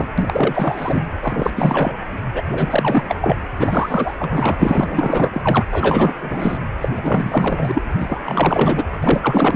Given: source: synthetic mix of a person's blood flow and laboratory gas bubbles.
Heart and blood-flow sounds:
Doppler ultrasound of blood flow; precordium
0.00-0.09 s: bubbles
0.17-1.03 s: bubbles
1.21-1.52 s: bubbles
1.55-1.97 s: bubbles
2.32-2.47 s: bubbles
2.50-3.05 s: bubbles
3.08-3.36 s: bubbles
3.59-4.15 s: bubbles
4.19-5.65 s: bubbles
5.71-6.15 s: bubbles
6.21-6.57 s: bubbles
6.81-6.89 s: bubbles
6.95-7.82 s: bubbles
7.99-8.86 s: bubbles
9.00-9.56 s: bubbles
From the record:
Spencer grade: 4 (maximum detectable bubble signal sounding continuously throughout systole and diastole of every cardiac period, and overriding the amplitude of the normal cardiac signals); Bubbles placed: anywhere in the cardiac cycle

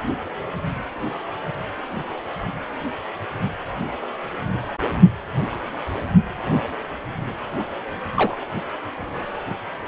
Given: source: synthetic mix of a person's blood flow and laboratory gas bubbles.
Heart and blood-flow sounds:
Doppler ultrasound of blood flow; precordium
8.16-8.35 s: bubbles
From the record:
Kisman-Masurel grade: 112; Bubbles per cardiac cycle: 1 to 2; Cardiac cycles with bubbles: 1 to 10%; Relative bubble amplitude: moderate (0.250 to 0.450); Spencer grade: 1 (occasional bubble signal discernible with the cardiac motion signal, with majority of cardiac periods free of bubbles); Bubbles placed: anywhere in the cardiac cycle

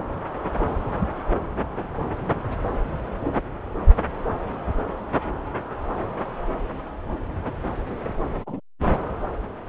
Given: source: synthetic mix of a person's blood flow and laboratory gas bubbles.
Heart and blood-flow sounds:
Doppler ultrasound of blood flow; subclavian vein
8.46-8.60 s: bubbles
From the record:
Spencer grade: 1 (occasional bubble signal discernible with the cardiac motion signal, with majority of cardiac periods free of bubbles); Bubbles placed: anywhere in the cardiac cycle

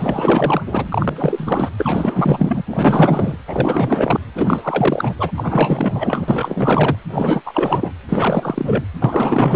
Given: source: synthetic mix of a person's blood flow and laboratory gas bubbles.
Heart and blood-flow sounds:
Doppler ultrasound of blood flow; precordium
0.00-0.61 s: bubbles
0.65-1.70 s: bubbles
1.77-2.63 s: bubbles
2.67-3.37 s: bubbles
3.48-4.20 s: bubbles
4.35-5.15 s: bubbles
5.19-5.31 s: bubbles
5.37-6.96 s: bubbles
7.11-7.42 s: bubbles
7.46-7.92 s: bubbles
8.08-8.84 s: bubbles
9.02-9.55 s: bubbles
From the record:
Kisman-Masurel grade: 444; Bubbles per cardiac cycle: continuous sound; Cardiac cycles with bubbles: 100%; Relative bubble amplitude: maximal (0.775 to 0.999); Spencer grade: 4 (maximum detectable bubble signal sounding continuously throughout systole and diastole of every cardiac period, and overriding the amplitude of the normal cardiac signals); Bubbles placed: anywhere in the cardiac cycle

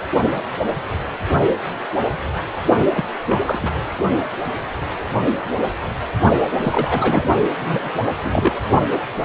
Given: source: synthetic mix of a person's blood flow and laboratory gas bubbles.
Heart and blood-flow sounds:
Doppler ultrasound of blood flow; precordium
2.93-3.04 s: bubbles
3.29-3.40 s: bubbles
3.44-3.82 s: bubbles
6.64-7.25 s: bubbles
7.60-7.92 s: bubbles
8.24-8.54 s: bubbles
From the record:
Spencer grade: 2 (many but less than half of the cardiac periods contain bubble signals, singularly or in groups); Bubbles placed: only in the low amplitude regions of the cardiac cycle

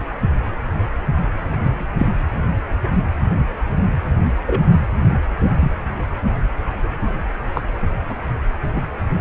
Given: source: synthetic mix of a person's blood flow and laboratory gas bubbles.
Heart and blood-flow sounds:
Doppler ultrasound of blood flow; precordium
1.55-1.87 s: bubbles
1.98-2.12 s: bubbles
4.46-4.62 s: bubbles
4.72-4.81 s: bubbles
5.38-5.74 s: bubbles
6.83-6.89 s: bubbles
7.54-7.61 s: bubbles
8.09-8.16 s: bubbles
8.76-8.82 s: bubbles
9.19-9.21 s: bubbles
From the record:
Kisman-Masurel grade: 122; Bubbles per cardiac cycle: 1 to 2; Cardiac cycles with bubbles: 10 to 50%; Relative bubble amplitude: moderate (0.250 to 0.450); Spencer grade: 2 (many but less than half of the cardiac periods contain bubble signals, singularly or in groups); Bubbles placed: anywhere in the cardiac cycle

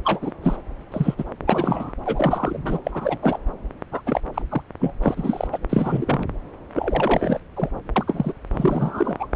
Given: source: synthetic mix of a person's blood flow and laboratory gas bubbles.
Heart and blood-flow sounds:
Doppler ultrasound of blood flow; subclavian vein
0.05-0.32 s: bubbles
0.43-0.56 s: bubbles
0.92-1.15 s: bubbles
1.18-1.25 s: bubbles
1.47-1.94 s: bubbles
2.06-2.81 s: bubbles
2.84-3.18 s: bubbles
3.23-3.39 s: bubbles
3.91-4.01 s: bubbles
4.05-4.21 s: bubbles
4.34-4.42 s: bubbles
4.49-4.62 s: bubbles
4.80-4.94 s: bubbles
5.03-5.47 s: bubbles
5.52-5.58 s: bubbles
5.69-6.26 s: bubbles
6.74-7.39 s: bubbles
7.56-7.70 s: bubbles
7.96-8.32 s: bubbles
8.53-9.27 s: bubbles
From the record:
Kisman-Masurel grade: 242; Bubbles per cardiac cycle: several, 3 to 8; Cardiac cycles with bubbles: 100%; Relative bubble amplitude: moderate (0.250 to 0.450); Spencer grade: 3 (all of the cardiac periods contain showers or single bubble signals, but not dominating or overriding the cardiac motion signals); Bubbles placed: anywhere in the cardiac cycle

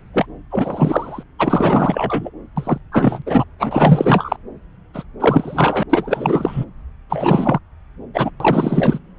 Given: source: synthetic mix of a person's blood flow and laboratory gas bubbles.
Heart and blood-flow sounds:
Doppler ultrasound of blood flow; subclavian vein
0.14-0.26 s: bubbles
0.51-1.23 s: bubbles
1.38-2.31 s: bubbles
2.56-2.78 s: bubbles
2.92-3.22 s: bubbles
3.26-3.44 s: bubbles
3.59-4.36 s: bubbles
4.94-5.04 s: bubbles
5.20-5.83 s: bubbles
5.90-6.65 s: bubbles
7.09-7.59 s: bubbles
8.13-8.31 s: bubbles
8.40-8.99 s: bubbles
From the record:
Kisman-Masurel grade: 343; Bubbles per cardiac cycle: rolling drumbeat, 9 or more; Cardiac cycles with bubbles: 100%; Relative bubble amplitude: loud (0.450 to 0.775); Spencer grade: 3 (all of the cardiac periods contain showers or single bubble signals, but not dominating or overriding the cardiac motion signals); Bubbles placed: anywhere in the cardiac cycle

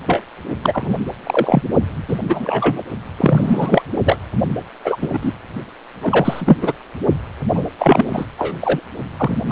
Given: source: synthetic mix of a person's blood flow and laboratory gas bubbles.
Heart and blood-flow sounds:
Doppler ultrasound of blood flow; precordium
0.06-0.23 s: bubbles
0.61-0.95 s: bubbles
1.24-1.62 s: bubbles
2.08-2.18 s: bubbles
2.29-2.83 s: bubbles
3.17-3.82 s: bubbles
4.04-4.17 s: bubbles
4.84-4.96 s: bubbles
5.01-5.08 s: bubbles
5.12-5.19 s: bubbles
5.21-5.33 s: bubbles
6.02-6.58 s: bubbles
6.61-6.72 s: bubbles
7.54-7.64 s: bubbles
7.79-8.24 s: bubbles
8.38-8.56 s: bubbles
8.61-8.80 s: bubbles
9.17-9.38 s: bubbles
9.48-9.52 s: bubbles
From the record:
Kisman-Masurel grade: 243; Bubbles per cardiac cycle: several, 3 to 8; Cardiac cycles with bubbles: 100%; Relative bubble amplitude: loud (0.450 to 0.775); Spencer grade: 3 (all of the cardiac periods contain showers or single bubble signals, but not dominating or overriding the cardiac motion signals); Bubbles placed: only in the low amplitude regions of the cardiac cycle

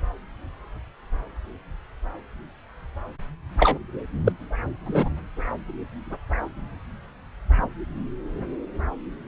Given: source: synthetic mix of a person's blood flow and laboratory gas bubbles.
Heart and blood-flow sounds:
Doppler ultrasound of blood flow; subclavian vein
3.57-3.78 s: bubbles
4.25-4.32 s: bubbles
4.86-5.09 s: bubbles
From the record:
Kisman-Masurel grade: 213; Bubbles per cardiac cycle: several, 3 to 8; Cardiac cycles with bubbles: 1 to 10%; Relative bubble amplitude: loud (0.450 to 0.775); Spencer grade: 1 (occasional bubble signal discernible with the cardiac motion signal, with majority of cardiac periods free of bubbles); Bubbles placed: anywhere in the cardiac cycle

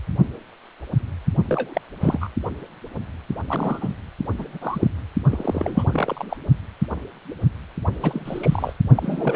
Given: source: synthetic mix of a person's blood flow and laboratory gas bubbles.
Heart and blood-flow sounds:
Doppler ultrasound of blood flow; precordium
1.46-1.81 s: bubbles
2.00-2.29 s: bubbles
3.46-3.94 s: bubbles
4.37-4.58 s: bubbles
4.61-4.88 s: bubbles
5.29-5.84 s: bubbles
5.91-6.25 s: bubbles
6.29-6.37 s: bubbles
8.01-8.73 s: bubbles
8.95-9.36 s: bubbles
From the record:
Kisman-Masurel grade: 232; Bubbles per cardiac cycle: several, 3 to 8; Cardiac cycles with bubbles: 50 to 99%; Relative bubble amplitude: moderate (0.250 to 0.450); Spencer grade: 3 (all of the cardiac periods contain showers or single bubble signals, but not dominating or overriding the cardiac motion signals); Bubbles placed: only in the low amplitude regions of the cardiac cycle

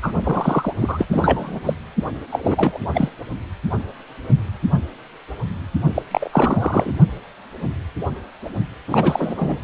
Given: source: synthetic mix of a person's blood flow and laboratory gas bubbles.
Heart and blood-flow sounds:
Doppler ultrasound of blood flow; precordium
0.02-0.12 s: bubbles
0.24-0.73 s: bubbles
0.80-1.06 s: bubbles
1.11-1.59 s: bubbles
1.65-1.74 s: bubbles
2.32-2.78 s: bubbles
2.94-3.09 s: bubbles
5.94-6.02 s: bubbles
6.11-6.92 s: bubbles
8.88-9.64 s: bubbles
From the record:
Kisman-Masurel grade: 333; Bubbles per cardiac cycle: rolling drumbeat, 9 or more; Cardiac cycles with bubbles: 50 to 99%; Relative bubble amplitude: loud (0.450 to 0.775); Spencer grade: 3 (all of the cardiac periods contain showers or single bubble signals, but not dominating or overriding the cardiac motion signals); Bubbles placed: only in the low amplitude regions of the cardiac cycle

